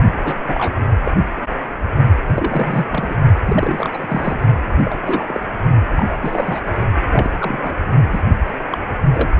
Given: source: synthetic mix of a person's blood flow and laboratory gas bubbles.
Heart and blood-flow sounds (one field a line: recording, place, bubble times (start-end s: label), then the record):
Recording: Doppler ultrasound of blood flow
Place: precordium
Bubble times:
0.25-0.35 s: bubbles
0.47-0.79 s: bubbles
1.04-1.12 s: bubbles
2.27-2.86 s: bubbles
2.90-3.15 s: bubbles
3.45-3.89 s: bubbles
3.93-4.40 s: bubbles
4.84-5.25 s: bubbles
5.28-5.41 s: bubbles
5.87-6.05 s: bubbles
6.09-6.60 s: bubbles
7.12-7.30 s: bubbles
7.40-7.75 s: bubbles
8.12-8.21 s: bubbles
8.70-8.78 s: bubbles
9.14-9.29 s: bubbles
From the record:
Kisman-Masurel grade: 232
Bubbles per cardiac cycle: several, 3 to 8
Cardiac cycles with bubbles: 50 to 99%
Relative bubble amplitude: moderate (0.250 to 0.450)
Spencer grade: 3 (all of the cardiac periods contain showers or single bubble signals, but not dominating or overriding the cardiac motion signals)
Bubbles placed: only in the low amplitude regions of the cardiac cycle